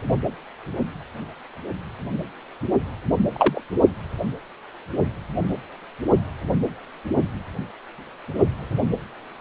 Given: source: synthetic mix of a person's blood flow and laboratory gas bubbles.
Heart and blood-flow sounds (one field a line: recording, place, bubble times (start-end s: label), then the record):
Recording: Doppler ultrasound of blood flow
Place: precordium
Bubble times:
3.33-3.62 s: bubbles
From the record:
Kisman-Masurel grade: 112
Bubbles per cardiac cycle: 1 to 2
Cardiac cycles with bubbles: 1 to 10%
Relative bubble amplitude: moderate (0.250 to 0.450)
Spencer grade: 1 (occasional bubble signal discernible with the cardiac motion signal, with majority of cardiac periods free of bubbles)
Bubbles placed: anywhere in the cardiac cycle